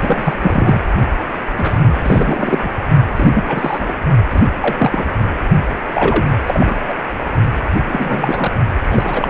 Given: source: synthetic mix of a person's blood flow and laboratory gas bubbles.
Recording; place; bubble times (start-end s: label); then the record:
Doppler ultrasound of blood flow; precordium
0.00-0.37 s: bubbles
0.40-0.82 s: bubbles
1.58-2.69 s: bubbles
3.16-3.93 s: bubbles
4.30-4.47 s: bubbles
4.60-5.06 s: bubbles
5.94-6.24 s: bubbles
6.46-6.74 s: bubbles
6.88-6.94 s: bubbles
7.86-8.52 s: bubbles
8.89-9.30 s: bubbles
From the record:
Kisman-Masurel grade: 332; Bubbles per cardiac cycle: rolling drumbeat, 9 or more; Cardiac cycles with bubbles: 50 to 99%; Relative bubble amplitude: moderate (0.250 to 0.450); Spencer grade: 3 (all of the cardiac periods contain showers or single bubble signals, but not dominating or overriding the cardiac motion signals); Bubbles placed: only in the low amplitude regions of the cardiac cycle